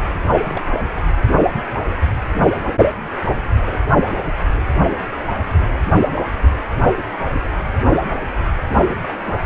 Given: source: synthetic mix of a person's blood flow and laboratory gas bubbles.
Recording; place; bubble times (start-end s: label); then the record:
Doppler ultrasound of blood flow; precordium
0.33-0.35 s: bubbles
0.38-0.70 s: bubbles
3.65-3.82 s: bubbles
8.87-9.13 s: bubbles
From the record:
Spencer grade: 2 (many but less than half of the cardiac periods contain bubble signals, singularly or in groups); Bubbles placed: anywhere in the cardiac cycle